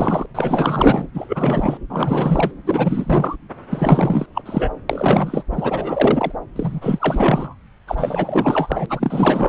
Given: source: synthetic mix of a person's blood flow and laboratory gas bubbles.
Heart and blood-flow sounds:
Doppler ultrasound of blood flow; subclavian vein
0.00-0.26 s: bubbles
0.35-1.07 s: bubbles
1.14-1.77 s: bubbles
1.89-2.52 s: bubbles
2.66-3.36 s: bubbles
3.70-4.26 s: bubbles
4.34-4.42 s: bubbles
4.46-4.70 s: bubbles
4.89-5.43 s: bubbles
5.52-6.32 s: bubbles
6.56-7.55 s: bubbles
7.87-8.86 s: bubbles
8.89-9.49 s: bubbles
From the record:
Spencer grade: 4 (maximum detectable bubble signal sounding continuously throughout systole and diastole of every cardiac period, and overriding the amplitude of the normal cardiac signals); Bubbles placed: anywhere in the cardiac cycle

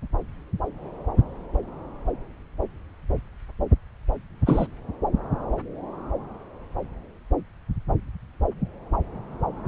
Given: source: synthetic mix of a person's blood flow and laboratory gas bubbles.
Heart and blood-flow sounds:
Doppler ultrasound of blood flow; subclavian vein
4.46-4.67 s: bubbles
From the record:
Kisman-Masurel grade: 212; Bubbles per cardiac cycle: several, 3 to 8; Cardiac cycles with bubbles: 1 to 10%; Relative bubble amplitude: moderate (0.250 to 0.450); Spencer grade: 1 (occasional bubble signal discernible with the cardiac motion signal, with majority of cardiac periods free of bubbles); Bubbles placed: anywhere in the cardiac cycle

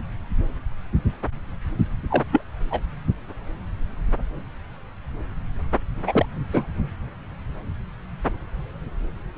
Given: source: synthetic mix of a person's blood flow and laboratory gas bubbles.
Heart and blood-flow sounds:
Doppler ultrasound of blood flow; subclavian vein
2.10-2.23 s: bubbles
2.31-2.41 s: bubbles
2.71-2.82 s: bubbles
6.07-6.25 s: bubbles
6.52-6.66 s: bubbles
From the record:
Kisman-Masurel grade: 222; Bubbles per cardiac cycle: several, 3 to 8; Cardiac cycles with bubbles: 10 to 50%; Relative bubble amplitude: moderate (0.250 to 0.450); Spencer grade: 2 (many but less than half of the cardiac periods contain bubble signals, singularly or in groups); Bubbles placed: anywhere in the cardiac cycle

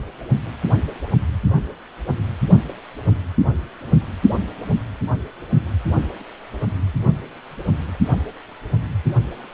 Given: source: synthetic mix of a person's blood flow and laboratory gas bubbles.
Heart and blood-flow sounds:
Doppler ultrasound of blood flow; precordium
no bubbles
From the record:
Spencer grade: 0 (complete lack of bubble signals)

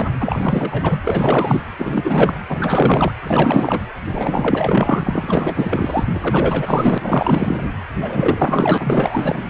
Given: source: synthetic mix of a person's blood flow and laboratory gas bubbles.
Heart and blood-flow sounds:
Doppler ultrasound of blood flow; precordium
0.00-0.09 s: bubbles
0.20-0.99 s: bubbles
1.03-1.62 s: bubbles
1.78-2.34 s: bubbles
2.49-3.12 s: bubbles
3.24-3.83 s: bubbles
4.10-6.05 s: bubbles
6.13-6.98 s: bubbles
7.01-7.67 s: bubbles
8.01-9.44 s: bubbles
9.48-9.50 s: bubbles
From the record:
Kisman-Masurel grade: 444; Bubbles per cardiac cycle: continuous sound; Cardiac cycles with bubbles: 100%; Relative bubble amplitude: maximal (0.775 to 0.999); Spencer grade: 4 (maximum detectable bubble signal sounding continuously throughout systole and diastole of every cardiac period, and overriding the amplitude of the normal cardiac signals); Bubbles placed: anywhere in the cardiac cycle

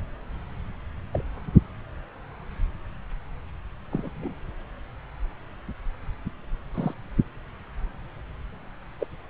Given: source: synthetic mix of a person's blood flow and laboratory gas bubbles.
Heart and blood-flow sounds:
Doppler ultrasound of blood flow; subclavian vein
1.11-1.24 s: bubbles
3.92-4.09 s: bubbles
4.21-4.32 s: bubbles
6.74-6.94 s: bubbles
8.99-9.07 s: bubbles
From the record:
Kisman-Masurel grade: 121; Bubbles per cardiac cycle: 1 to 2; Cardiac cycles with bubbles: 10 to 50%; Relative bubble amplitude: barely perceptible (0.100 to 0.250); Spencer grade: 2 (many but less than half of the cardiac periods contain bubble signals, singularly or in groups); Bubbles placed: anywhere in the cardiac cycle

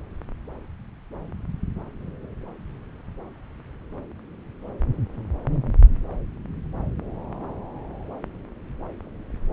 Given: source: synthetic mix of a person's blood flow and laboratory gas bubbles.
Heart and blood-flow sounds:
Doppler ultrasound of blood flow; subclavian vein
no bubbles
From the record:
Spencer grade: 0 (complete lack of bubble signals)

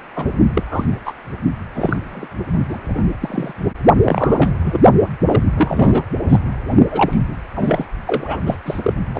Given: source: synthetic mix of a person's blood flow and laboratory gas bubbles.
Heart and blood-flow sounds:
Doppler ultrasound of blood flow; precordium
0.16-0.26 s: bubbles
0.54-0.63 s: bubbles
0.67-0.98 s: bubbles
1.05-1.13 s: bubbles
1.75-2.27 s: bubbles
2.69-2.79 s: bubbles
2.94-3.08 s: bubbles
3.21-3.53 s: bubbles
4.03-4.58 s: bubbles
4.63-4.79 s: bubbles
5.26-5.41 s: bubbles
5.56-6.04 s: bubbles
6.29-6.38 s: bubbles
6.91-7.18 s: bubbles
7.56-7.86 s: bubbles
8.06-8.41 s: bubbles
8.46-8.57 s: bubbles
8.65-8.93 s: bubbles
9.14-9.20 s: bubbles
From the record:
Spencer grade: 3 (all of the cardiac periods contain showers or single bubble signals, but not dominating or overriding the cardiac motion signals); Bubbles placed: only in the low amplitude regions of the cardiac cycle

